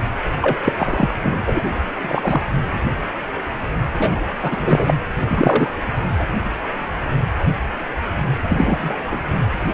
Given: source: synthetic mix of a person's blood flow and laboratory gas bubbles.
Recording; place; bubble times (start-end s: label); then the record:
Doppler ultrasound of blood flow; precordium
0.42-0.57 s: bubbles
0.65-0.73 s: bubbles
0.77-1.16 s: bubbles
1.23-1.44 s: bubbles
1.46-1.62 s: bubbles
2.00-2.44 s: bubbles
3.99-4.22 s: bubbles
4.42-4.94 s: bubbles
5.29-5.76 s: bubbles
6.19-6.25 s: bubbles
8.49-8.97 s: bubbles
9.11-9.21 s: bubbles
From the record:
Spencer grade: 3 (all of the cardiac periods contain showers or single bubble signals, but not dominating or overriding the cardiac motion signals); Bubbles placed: anywhere in the cardiac cycle